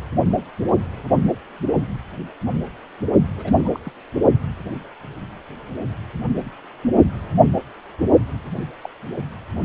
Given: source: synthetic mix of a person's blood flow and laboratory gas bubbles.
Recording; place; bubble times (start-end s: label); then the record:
Doppler ultrasound of blood flow; precordium
3.36-3.69 s: bubbles
3.72-3.79 s: bubbles
3.85-3.91 s: bubbles
8.57-8.64 s: bubbles
8.84-8.88 s: bubbles
From the record:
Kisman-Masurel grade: 221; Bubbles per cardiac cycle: several, 3 to 8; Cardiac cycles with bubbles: 10 to 50%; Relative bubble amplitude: barely perceptible (0.100 to 0.250); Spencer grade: 2 (many but less than half of the cardiac periods contain bubble signals, singularly or in groups); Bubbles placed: only in the low amplitude regions of the cardiac cycle